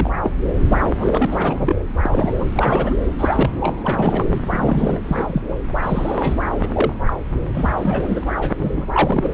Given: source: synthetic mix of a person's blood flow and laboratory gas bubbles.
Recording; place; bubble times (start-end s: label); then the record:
Doppler ultrasound of blood flow; subclavian vein
0.00-0.10 s: bubbles
0.23-0.31 s: bubbles
0.60-0.77 s: bubbles
0.99-1.26 s: bubbles
1.30-1.76 s: bubbles
2.03-2.95 s: bubbles
3.18-3.75 s: bubbles
3.85-4.25 s: bubbles
4.50-5.00 s: bubbles
5.05-5.42 s: bubbles
5.48-5.55 s: bubbles
5.83-6.33 s: bubbles
6.62-6.67 s: bubbles
6.76-6.93 s: bubbles
7.05-7.13 s: bubbles
7.54-7.72 s: bubbles
7.76-8.23 s: bubbles
8.29-8.53 s: bubbles
8.58-8.86 s: bubbles
8.92-9.34 s: bubbles
From the record:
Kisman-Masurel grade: 242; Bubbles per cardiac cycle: several, 3 to 8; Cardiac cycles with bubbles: 100%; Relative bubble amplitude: moderate (0.250 to 0.450); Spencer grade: 3 (all of the cardiac periods contain showers or single bubble signals, but not dominating or overriding the cardiac motion signals); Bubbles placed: anywhere in the cardiac cycle